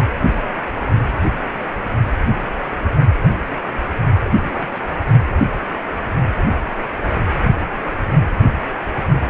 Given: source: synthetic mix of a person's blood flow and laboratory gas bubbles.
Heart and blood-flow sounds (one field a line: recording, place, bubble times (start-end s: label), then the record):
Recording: Doppler ultrasound of blood flow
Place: precordium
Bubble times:
4.32-4.69 s: bubbles
4.74-4.82 s: bubbles
From the record:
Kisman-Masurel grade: 211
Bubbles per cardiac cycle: several, 3 to 8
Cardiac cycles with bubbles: 1 to 10%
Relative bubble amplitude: barely perceptible (0.100 to 0.250)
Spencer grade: 1 (occasional bubble signal discernible with the cardiac motion signal, with majority of cardiac periods free of bubbles)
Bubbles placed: only in the low amplitude regions of the cardiac cycle